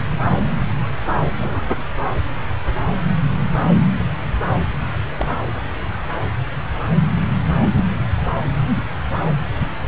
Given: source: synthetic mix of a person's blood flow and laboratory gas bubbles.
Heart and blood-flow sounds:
Doppler ultrasound of blood flow; subclavian vein
1.36-1.62 s: bubbles
5.17-5.38 s: bubbles
7.61-7.71 s: bubbles
7.75-7.84 s: bubbles
From the record:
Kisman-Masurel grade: 121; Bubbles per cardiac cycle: 1 to 2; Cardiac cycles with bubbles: 10 to 50%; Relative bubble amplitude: barely perceptible (0.100 to 0.250); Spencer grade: 2 (many but less than half of the cardiac periods contain bubble signals, singularly or in groups); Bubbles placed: anywhere in the cardiac cycle

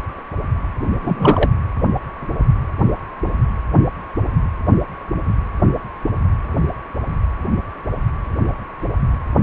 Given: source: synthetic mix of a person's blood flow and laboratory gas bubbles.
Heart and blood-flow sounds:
Doppler ultrasound of blood flow; precordium
1.02-1.50 s: bubbles
From the record:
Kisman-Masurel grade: 213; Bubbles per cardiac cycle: several, 3 to 8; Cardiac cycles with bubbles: 1 to 10%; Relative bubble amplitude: loud (0.450 to 0.775); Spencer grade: 1 (occasional bubble signal discernible with the cardiac motion signal, with majority of cardiac periods free of bubbles); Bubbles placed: anywhere in the cardiac cycle

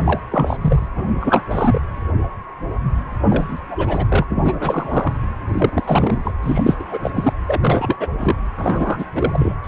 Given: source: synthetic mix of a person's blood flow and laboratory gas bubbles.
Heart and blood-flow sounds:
Doppler ultrasound of blood flow; precordium
0.00-0.20 s: bubbles
0.30-0.56 s: bubbles
0.61-0.88 s: bubbles
0.95-1.13 s: bubbles
1.20-1.42 s: bubbles
1.50-1.81 s: bubbles
3.29-3.58 s: bubbles
3.69-4.06 s: bubbles
4.09-4.25 s: bubbles
4.30-5.14 s: bubbles
5.49-6.31 s: bubbles
6.43-6.76 s: bubbles
6.79-6.99 s: bubbles
7.03-7.11 s: bubbles
7.15-7.33 s: bubbles
7.48-7.97 s: bubbles
8.00-8.08 s: bubbles
8.18-8.36 s: bubbles
8.56-9.05 s: bubbles
9.15-9.54 s: bubbles
9.64-9.68 s: bubbles
From the record:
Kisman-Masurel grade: 332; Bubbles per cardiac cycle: rolling drumbeat, 9 or more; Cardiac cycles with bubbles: 50 to 99%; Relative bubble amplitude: moderate (0.250 to 0.450); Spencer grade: 3 (all of the cardiac periods contain showers or single bubble signals, but not dominating or overriding the cardiac motion signals); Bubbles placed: anywhere in the cardiac cycle

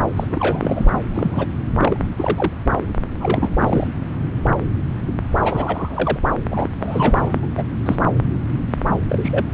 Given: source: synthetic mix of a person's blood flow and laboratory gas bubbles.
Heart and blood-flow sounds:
Doppler ultrasound of blood flow; subclavian vein
0.16-0.27 s: bubbles
0.30-0.91 s: bubbles
1.14-1.48 s: bubbles
1.79-1.96 s: bubbles
2.02-2.07 s: bubbles
2.17-2.53 s: bubbles
3.19-3.54 s: bubbles
3.60-3.87 s: bubbles
5.44-6.19 s: bubbles
6.50-6.69 s: bubbles
6.80-7.48 s: bubbles
7.57-7.64 s: bubbles
7.86-7.96 s: bubbles
9.09-9.46 s: bubbles
From the record:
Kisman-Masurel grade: 232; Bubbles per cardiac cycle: several, 3 to 8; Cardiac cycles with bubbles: 50 to 99%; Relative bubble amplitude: moderate (0.250 to 0.450); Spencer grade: 3 (all of the cardiac periods contain showers or single bubble signals, but not dominating or overriding the cardiac motion signals); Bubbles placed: anywhere in the cardiac cycle

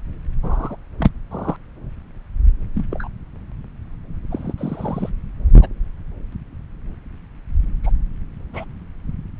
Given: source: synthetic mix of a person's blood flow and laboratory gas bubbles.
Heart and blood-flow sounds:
Doppler ultrasound of blood flow; subclavian vein
0.43-0.76 s: bubbles
0.99-1.11 s: bubbles
1.30-1.56 s: bubbles
2.75-2.84 s: bubbles
2.91-3.08 s: bubbles
4.29-4.53 s: bubbles
4.58-5.10 s: bubbles
5.61-5.69 s: bubbles
6.32-6.35 s: bubbles
7.83-7.91 s: bubbles
8.54-8.64 s: bubbles
From the record:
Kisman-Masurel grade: 122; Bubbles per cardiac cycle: 1 to 2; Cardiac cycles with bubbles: 10 to 50%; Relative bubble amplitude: moderate (0.250 to 0.450); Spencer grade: 2 (many but less than half of the cardiac periods contain bubble signals, singularly or in groups); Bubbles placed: anywhere in the cardiac cycle

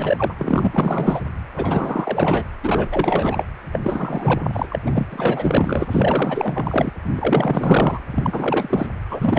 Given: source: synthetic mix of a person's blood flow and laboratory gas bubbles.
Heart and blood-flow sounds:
Doppler ultrasound of blood flow; precordium
0.00-0.34 s: bubbles
0.38-1.21 s: bubbles
1.56-2.45 s: bubbles
2.63-2.88 s: bubbles
2.91-3.45 s: bubbles
3.72-3.80 s: bubbles
3.82-4.66 s: bubbles
4.70-4.79 s: bubbles
4.86-5.86 s: bubbles
5.91-6.92 s: bubbles
7.08-8.01 s: bubbles
8.12-8.88 s: bubbles
9.10-9.39 s: bubbles
From the record:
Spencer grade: 4 (maximum detectable bubble signal sounding continuously throughout systole and diastole of every cardiac period, and overriding the amplitude of the normal cardiac signals); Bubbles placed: anywhere in the cardiac cycle

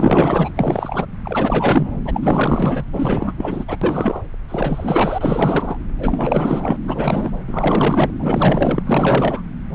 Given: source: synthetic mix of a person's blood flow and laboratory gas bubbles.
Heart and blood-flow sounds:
Doppler ultrasound of blood flow; subclavian vein
0.00-0.51 s: bubbles
0.56-1.07 s: bubbles
1.24-1.98 s: bubbles
2.05-2.84 s: bubbles
2.92-3.33 s: bubbles
3.37-3.65 s: bubbles
3.67-3.77 s: bubbles
3.81-4.22 s: bubbles
4.49-5.78 s: bubbles
5.99-6.76 s: bubbles
6.83-7.32 s: bubbles
7.47-8.10 s: bubbles
8.18-8.82 s: bubbles
8.85-9.41 s: bubbles
From the record:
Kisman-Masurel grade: 444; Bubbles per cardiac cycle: continuous sound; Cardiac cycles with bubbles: 100%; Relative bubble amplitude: maximal (0.775 to 0.999); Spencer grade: 4 (maximum detectable bubble signal sounding continuously throughout systole and diastole of every cardiac period, and overriding the amplitude of the normal cardiac signals); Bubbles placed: anywhere in the cardiac cycle

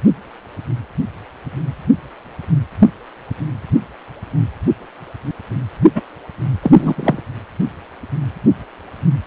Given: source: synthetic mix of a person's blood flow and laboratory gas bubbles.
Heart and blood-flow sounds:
Doppler ultrasound of blood flow; precordium
5.95-6.02 s: bubbles
6.63-7.22 s: bubbles
From the record:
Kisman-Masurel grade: 223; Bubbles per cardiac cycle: several, 3 to 8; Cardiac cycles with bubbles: 10 to 50%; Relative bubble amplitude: loud (0.450 to 0.775); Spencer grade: 2 (many but less than half of the cardiac periods contain bubble signals, singularly or in groups); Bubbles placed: only in the low amplitude regions of the cardiac cycle

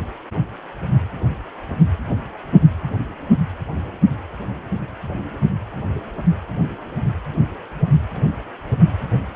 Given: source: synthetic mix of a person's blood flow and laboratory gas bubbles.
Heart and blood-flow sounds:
Doppler ultrasound of blood flow; precordium
no bubbles
From the record:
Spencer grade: 0 (complete lack of bubble signals)

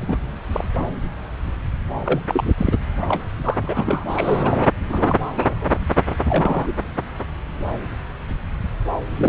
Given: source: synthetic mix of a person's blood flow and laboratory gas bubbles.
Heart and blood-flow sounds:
Doppler ultrasound of blood flow; subclavian vein
0.01-0.19 s: bubbles
0.52-0.64 s: bubbles
0.79-0.86 s: bubbles
2.05-2.19 s: bubbles
2.28-2.49 s: bubbles
2.57-2.76 s: bubbles
3.02-3.23 s: bubbles
3.44-3.58 s: bubbles
3.62-4.04 s: bubbles
4.08-4.66 s: bubbles
4.89-5.17 s: bubbles
5.36-5.69 s: bubbles
6.23-6.72 s: bubbles
9.16-9.28 s: bubbles
From the record:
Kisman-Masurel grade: 232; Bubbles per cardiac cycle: several, 3 to 8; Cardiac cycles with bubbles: 50 to 99%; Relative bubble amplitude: moderate (0.250 to 0.450); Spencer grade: 3 (all of the cardiac periods contain showers or single bubble signals, but not dominating or overriding the cardiac motion signals); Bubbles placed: anywhere in the cardiac cycle

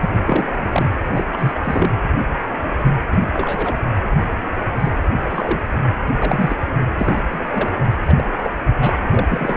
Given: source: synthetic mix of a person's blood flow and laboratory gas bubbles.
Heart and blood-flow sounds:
Doppler ultrasound of blood flow; precordium
0.01-0.44 s: bubbles
0.58-0.90 s: bubbles
1.15-1.24 s: bubbles
1.32-1.59 s: bubbles
1.64-1.90 s: bubbles
2.84-2.94 s: bubbles
3.11-3.17 s: bubbles
3.32-3.74 s: bubbles
4.79-4.90 s: bubbles
5.25-5.61 s: bubbles
6.20-6.56 s: bubbles
6.99-7.21 s: bubbles
7.31-7.44 s: bubbles
7.48-7.69 s: bubbles
8.06-8.14 s: bubbles
8.17-8.23 s: bubbles
8.38-8.51 s: bubbles
8.80-8.96 s: bubbles
9.11-9.57 s: bubbles
From the record:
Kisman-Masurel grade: 232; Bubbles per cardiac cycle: several, 3 to 8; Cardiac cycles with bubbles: 50 to 99%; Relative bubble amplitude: moderate (0.250 to 0.450); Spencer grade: 3 (all of the cardiac periods contain showers or single bubble signals, but not dominating or overriding the cardiac motion signals); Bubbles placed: anywhere in the cardiac cycle

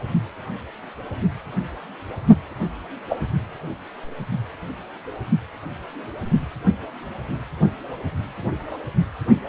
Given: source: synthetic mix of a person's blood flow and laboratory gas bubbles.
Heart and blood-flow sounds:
Doppler ultrasound of blood flow; precordium
3.09-3.27 s: bubbles
From the record:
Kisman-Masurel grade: 112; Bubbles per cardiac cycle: 1 to 2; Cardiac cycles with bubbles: 1 to 10%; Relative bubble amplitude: moderate (0.250 to 0.450); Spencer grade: 1 (occasional bubble signal discernible with the cardiac motion signal, with majority of cardiac periods free of bubbles); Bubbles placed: only in the low amplitude regions of the cardiac cycle

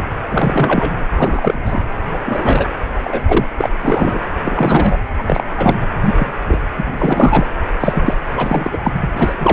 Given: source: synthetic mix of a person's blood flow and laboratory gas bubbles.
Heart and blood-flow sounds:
Doppler ultrasound of blood flow; precordium
0.00-0.04 s: bubbles
0.28-0.93 s: bubbles
1.15-1.84 s: bubbles
2.10-2.19 s: bubbles
2.25-2.67 s: bubbles
2.97-3.23 s: bubbles
3.27-3.46 s: bubbles
3.58-3.69 s: bubbles
3.81-4.19 s: bubbles
4.44-4.97 s: bubbles
5.18-5.23 s: bubbles
5.26-5.44 s: bubbles
5.57-5.75 s: bubbles
6.06-6.32 s: bubbles
6.47-6.61 s: bubbles
6.76-7.47 s: bubbles
7.80-8.15 s: bubbles
8.32-8.78 s: bubbles
8.84-9.11 s: bubbles
9.17-9.33 s: bubbles
9.39-9.53 s: bubbles
From the record:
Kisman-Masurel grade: 243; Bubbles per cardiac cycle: several, 3 to 8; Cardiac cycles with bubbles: 100%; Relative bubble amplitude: loud (0.450 to 0.775); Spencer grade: 3 (all of the cardiac periods contain showers or single bubble signals, but not dominating or overriding the cardiac motion signals); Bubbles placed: anywhere in the cardiac cycle

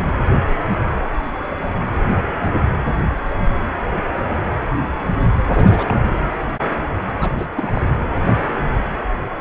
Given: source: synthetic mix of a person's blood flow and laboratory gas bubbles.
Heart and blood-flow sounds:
Doppler ultrasound of blood flow; precordium
5.51-6.14 s: bubbles
7.18-7.31 s: bubbles
7.38-7.46 s: bubbles
7.55-7.82 s: bubbles
From the record:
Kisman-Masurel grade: 222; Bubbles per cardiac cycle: several, 3 to 8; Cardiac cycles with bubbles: 10 to 50%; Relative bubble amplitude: moderate (0.250 to 0.450); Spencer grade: 2 (many but less than half of the cardiac periods contain bubble signals, singularly or in groups); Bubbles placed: anywhere in the cardiac cycle

